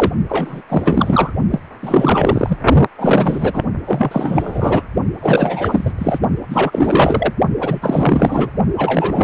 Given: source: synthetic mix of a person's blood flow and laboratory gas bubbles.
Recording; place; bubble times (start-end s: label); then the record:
Doppler ultrasound of blood flow; precordium
0.00-0.12 s: bubbles
0.28-0.62 s: bubbles
0.69-1.32 s: bubbles
1.51-1.60 s: bubbles
1.82-2.58 s: bubbles
2.98-3.62 s: bubbles
3.86-4.87 s: bubbles
5.19-5.93 s: bubbles
5.98-6.19 s: bubbles
6.50-7.33 s: bubbles
7.60-8.50 s: bubbles
8.78-9.24 s: bubbles
From the record:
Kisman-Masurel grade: 444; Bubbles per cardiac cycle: continuous sound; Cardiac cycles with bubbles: 100%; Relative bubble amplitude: maximal (0.775 to 0.999); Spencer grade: 4 (maximum detectable bubble signal sounding continuously throughout systole and diastole of every cardiac period, and overriding the amplitude of the normal cardiac signals); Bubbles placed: only in the low amplitude regions of the cardiac cycle